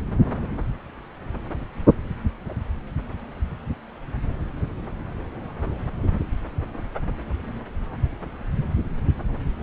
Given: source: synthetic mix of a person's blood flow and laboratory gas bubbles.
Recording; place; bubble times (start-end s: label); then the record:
Doppler ultrasound of blood flow; subclavian vein
no bubbles
From the record:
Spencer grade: 0 (complete lack of bubble signals)